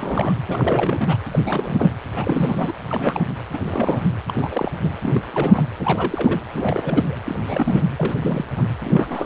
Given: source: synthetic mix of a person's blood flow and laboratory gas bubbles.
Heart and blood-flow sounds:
Doppler ultrasound of blood flow; precordium
0.00-0.33 s: bubbles
0.46-1.17 s: bubbles
1.31-1.40 s: bubbles
1.45-1.93 s: bubbles
2.15-2.72 s: bubbles
2.90-3.25 s: bubbles
3.52-3.59 s: bubbles
3.64-4.10 s: bubbles
4.28-4.33 s: bubbles
4.36-4.72 s: bubbles
4.83-4.91 s: bubbles
5.03-5.21 s: bubbles
5.33-5.64 s: bubbles
5.79-6.40 s: bubbles
6.53-7.19 s: bubbles
7.25-7.36 s: bubbles
7.47-7.83 s: bubbles
7.97-8.45 s: bubbles
8.56-8.64 s: bubbles
8.83-9.26 s: bubbles
From the record:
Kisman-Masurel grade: 342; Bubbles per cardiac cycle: rolling drumbeat, 9 or more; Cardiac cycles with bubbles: 100%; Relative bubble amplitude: moderate (0.250 to 0.450); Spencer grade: 3 (all of the cardiac periods contain showers or single bubble signals, but not dominating or overriding the cardiac motion signals); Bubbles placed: anywhere in the cardiac cycle

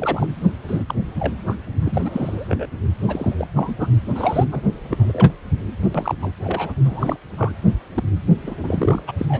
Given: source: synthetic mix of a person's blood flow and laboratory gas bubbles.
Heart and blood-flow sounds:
Doppler ultrasound of blood flow; precordium
0.00-0.27 s: bubbles
0.67-0.94 s: bubbles
1.19-1.33 s: bubbles
1.46-1.55 s: bubbles
1.79-2.67 s: bubbles
3.07-3.35 s: bubbles
3.38-3.47 s: bubbles
3.56-3.75 s: bubbles
3.79-3.87 s: bubbles
4.15-4.47 s: bubbles
4.51-4.62 s: bubbles
4.90-5.33 s: bubbles
5.95-6.15 s: bubbles
6.22-6.32 s: bubbles
6.44-6.73 s: bubbles
6.84-7.17 s: bubbles
7.37-7.54 s: bubbles
7.94-8.04 s: bubbles
8.43-8.55 s: bubbles
8.60-9.02 s: bubbles
9.08-9.12 s: bubbles
9.19-9.26 s: bubbles
9.29-9.40 s: bubbles
From the record:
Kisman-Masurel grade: 242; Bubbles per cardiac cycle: several, 3 to 8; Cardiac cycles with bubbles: 100%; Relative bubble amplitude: moderate (0.250 to 0.450); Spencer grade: 3 (all of the cardiac periods contain showers or single bubble signals, but not dominating or overriding the cardiac motion signals); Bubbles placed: anywhere in the cardiac cycle

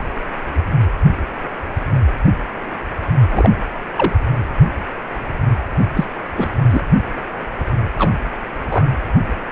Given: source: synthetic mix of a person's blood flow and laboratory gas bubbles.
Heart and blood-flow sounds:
Doppler ultrasound of blood flow; precordium
3.31-3.50 s: bubbles
3.96-4.13 s: bubbles
5.93-6.04 s: bubbles
6.35-6.49 s: bubbles
6.70-6.81 s: bubbles
7.98-8.11 s: bubbles
8.71-8.88 s: bubbles
From the record:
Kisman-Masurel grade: 222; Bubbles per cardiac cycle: several, 3 to 8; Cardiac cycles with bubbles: 10 to 50%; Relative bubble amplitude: moderate (0.250 to 0.450); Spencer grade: 2 (many but less than half of the cardiac periods contain bubble signals, singularly or in groups); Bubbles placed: anywhere in the cardiac cycle

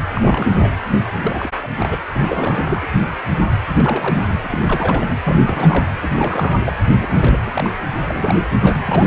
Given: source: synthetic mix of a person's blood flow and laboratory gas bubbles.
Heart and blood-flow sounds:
Doppler ultrasound of blood flow; precordium
0.14-0.72 s: bubbles
1.19-1.50 s: bubbles
1.62-1.68 s: bubbles
1.80-1.97 s: bubbles
2.15-2.87 s: bubbles
3.77-4.24 s: bubbles
4.27-4.34 s: bubbles
4.43-5.14 s: bubbles
5.23-5.86 s: bubbles
6.01-6.11 s: bubbles
6.15-6.73 s: bubbles
6.99-7.70 s: bubbles
7.97-8.39 s: bubbles
8.61-8.79 s: bubbles
8.85-9.06 s: bubbles
From the record:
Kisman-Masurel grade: 332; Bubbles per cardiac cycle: rolling drumbeat, 9 or more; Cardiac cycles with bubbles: 50 to 99%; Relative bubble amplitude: moderate (0.250 to 0.450); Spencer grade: 3 (all of the cardiac periods contain showers or single bubble signals, but not dominating or overriding the cardiac motion signals); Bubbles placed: anywhere in the cardiac cycle

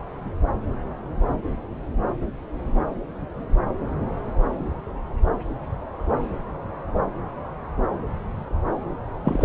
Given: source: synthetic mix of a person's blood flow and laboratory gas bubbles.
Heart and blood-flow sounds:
Doppler ultrasound of blood flow; subclavian vein
9.24-9.45 s: bubbles
From the record:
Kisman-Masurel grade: 113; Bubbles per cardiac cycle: 1 to 2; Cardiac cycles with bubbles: 1 to 10%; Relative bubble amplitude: loud (0.450 to 0.775); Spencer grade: 1 (occasional bubble signal discernible with the cardiac motion signal, with majority of cardiac periods free of bubbles); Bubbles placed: anywhere in the cardiac cycle

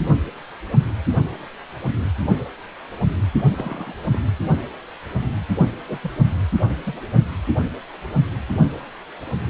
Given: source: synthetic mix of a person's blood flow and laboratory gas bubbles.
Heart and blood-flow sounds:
Doppler ultrasound of blood flow; precordium
3.52-3.95 s: bubbles
4.12-4.19 s: bubbles
5.88-5.98 s: bubbles
6.03-6.11 s: bubbles
6.84-7.00 s: bubbles
From the record:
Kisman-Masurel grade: 221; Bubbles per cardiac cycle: several, 3 to 8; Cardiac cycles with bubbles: 10 to 50%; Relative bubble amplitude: barely perceptible (0.100 to 0.250); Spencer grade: 2 (many but less than half of the cardiac periods contain bubble signals, singularly or in groups); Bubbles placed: only in the low amplitude regions of the cardiac cycle

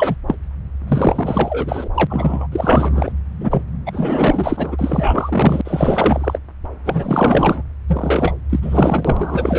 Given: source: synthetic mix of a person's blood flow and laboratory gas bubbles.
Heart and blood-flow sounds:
Doppler ultrasound of blood flow; subclavian vein
0.00-0.15 s: bubbles
0.27-0.35 s: bubbles
0.87-1.89 s: bubbles
1.94-2.48 s: bubbles
2.52-3.12 s: bubbles
3.40-3.63 s: bubbles
3.86-5.61 s: bubbles
5.64-6.38 s: bubbles
6.84-7.62 s: bubbles
7.88-8.35 s: bubbles
8.49-9.59 s: bubbles
From the record:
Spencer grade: 4 (maximum detectable bubble signal sounding continuously throughout systole and diastole of every cardiac period, and overriding the amplitude of the normal cardiac signals); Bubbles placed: anywhere in the cardiac cycle

